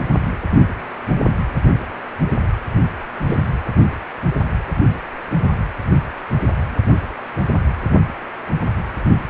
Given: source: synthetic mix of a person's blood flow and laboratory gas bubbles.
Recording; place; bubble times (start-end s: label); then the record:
Doppler ultrasound of blood flow; precordium
3.28-3.38 s: bubbles
From the record:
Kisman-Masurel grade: 113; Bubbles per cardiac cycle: 1 to 2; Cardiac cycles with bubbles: 1 to 10%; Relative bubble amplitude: loud (0.450 to 0.775); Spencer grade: 1 (occasional bubble signal discernible with the cardiac motion signal, with majority of cardiac periods free of bubbles); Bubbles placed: anywhere in the cardiac cycle